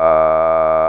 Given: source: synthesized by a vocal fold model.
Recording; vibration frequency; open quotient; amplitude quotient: sustained vowel; 80 Hz; 0.1; 1.4